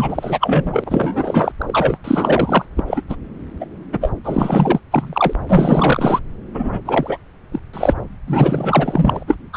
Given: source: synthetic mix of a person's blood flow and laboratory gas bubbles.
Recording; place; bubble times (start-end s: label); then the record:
Doppler ultrasound of blood flow; subclavian vein
0.00-1.52 s: bubbles
1.58-1.98 s: bubbles
2.04-2.66 s: bubbles
2.77-2.84 s: bubbles
2.87-3.02 s: bubbles
3.09-3.16 s: bubbles
3.60-3.66 s: bubbles
3.93-4.11 s: bubbles
4.23-4.80 s: bubbles
4.91-5.33 s: bubbles
5.49-6.20 s: bubbles
6.54-6.81 s: bubbles
6.85-7.18 s: bubbles
7.52-7.59 s: bubbles
7.73-7.94 s: bubbles
8.27-9.23 s: bubbles
9.27-9.36 s: bubbles
9.53-9.57 s: bubbles
From the record:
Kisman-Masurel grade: 444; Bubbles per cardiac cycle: continuous sound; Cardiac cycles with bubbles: 100%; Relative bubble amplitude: maximal (0.775 to 0.999); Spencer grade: 4 (maximum detectable bubble signal sounding continuously throughout systole and diastole of every cardiac period, and overriding the amplitude of the normal cardiac signals); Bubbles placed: anywhere in the cardiac cycle